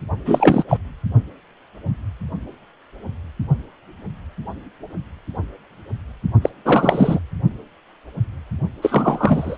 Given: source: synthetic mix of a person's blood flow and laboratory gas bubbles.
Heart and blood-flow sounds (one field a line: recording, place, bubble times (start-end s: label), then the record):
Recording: Doppler ultrasound of blood flow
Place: precordium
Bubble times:
0.26-0.64 s: bubbles
0.68-0.77 s: bubbles
6.42-6.50 s: bubbles
6.64-7.19 s: bubbles
8.82-9.57 s: bubbles
From the record:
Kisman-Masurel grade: 223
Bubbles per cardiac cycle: several, 3 to 8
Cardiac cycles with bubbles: 10 to 50%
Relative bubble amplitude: loud (0.450 to 0.775)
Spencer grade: 2 (many but less than half of the cardiac periods contain bubble signals, singularly or in groups)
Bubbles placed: only in the low amplitude regions of the cardiac cycle